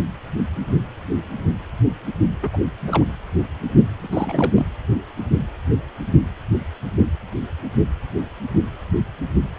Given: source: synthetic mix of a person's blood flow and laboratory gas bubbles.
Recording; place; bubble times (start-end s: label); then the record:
Doppler ultrasound of blood flow; precordium
2.42-2.50 s: bubbles
2.53-2.60 s: bubbles
2.87-3.03 s: bubbles
4.03-4.07 s: bubbles
4.12-4.66 s: bubbles
From the record:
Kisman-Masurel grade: 222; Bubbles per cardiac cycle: several, 3 to 8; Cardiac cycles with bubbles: 10 to 50%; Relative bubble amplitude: moderate (0.250 to 0.450); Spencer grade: 2 (many but less than half of the cardiac periods contain bubble signals, singularly or in groups); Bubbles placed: anywhere in the cardiac cycle